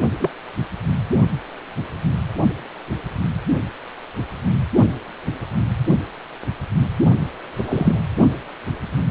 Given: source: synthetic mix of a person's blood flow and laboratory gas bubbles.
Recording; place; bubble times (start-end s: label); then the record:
Doppler ultrasound of blood flow; precordium
0.20-0.30 s: bubbles
7.56-8.01 s: bubbles
From the record:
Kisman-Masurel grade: 122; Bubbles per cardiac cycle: 1 to 2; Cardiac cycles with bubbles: 10 to 50%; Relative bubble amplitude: moderate (0.250 to 0.450); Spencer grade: 2 (many but less than half of the cardiac periods contain bubble signals, singularly or in groups); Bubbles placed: only in the low amplitude regions of the cardiac cycle